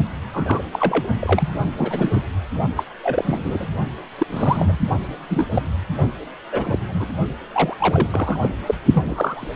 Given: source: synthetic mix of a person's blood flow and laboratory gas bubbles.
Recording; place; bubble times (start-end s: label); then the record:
Doppler ultrasound of blood flow; precordium
0.33-0.62 s: bubbles
0.72-1.06 s: bubbles
1.20-1.49 s: bubbles
1.77-2.21 s: bubbles
2.76-2.83 s: bubbles
3.02-3.68 s: bubbles
4.18-4.26 s: bubbles
4.30-4.77 s: bubbles
5.29-5.46 s: bubbles
5.53-5.62 s: bubbles
6.51-6.77 s: bubbles
6.88-7.10 s: bubbles
7.52-7.77 s: bubbles
7.79-8.07 s: bubbles
8.11-8.49 s: bubbles
8.66-8.75 s: bubbles
8.92-9.47 s: bubbles
From the record:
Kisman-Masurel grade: 243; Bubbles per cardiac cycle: several, 3 to 8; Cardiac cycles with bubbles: 100%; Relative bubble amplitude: loud (0.450 to 0.775); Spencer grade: 3 (all of the cardiac periods contain showers or single bubble signals, but not dominating or overriding the cardiac motion signals); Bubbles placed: only in the low amplitude regions of the cardiac cycle